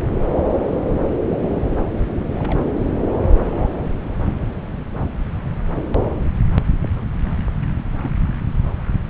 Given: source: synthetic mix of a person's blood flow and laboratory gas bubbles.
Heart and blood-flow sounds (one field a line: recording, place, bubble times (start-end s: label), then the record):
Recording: Doppler ultrasound of blood flow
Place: subclavian vein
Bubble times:
1.49-1.59 s: bubbles
2.34-2.59 s: bubbles
3.45-3.69 s: bubbles
8.03-8.09 s: bubbles
From the record:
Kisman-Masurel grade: 121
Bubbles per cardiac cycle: 1 to 2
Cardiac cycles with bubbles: 10 to 50%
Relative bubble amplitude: barely perceptible (0.100 to 0.250)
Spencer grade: 2 (many but less than half of the cardiac periods contain bubble signals, singularly or in groups)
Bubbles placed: anywhere in the cardiac cycle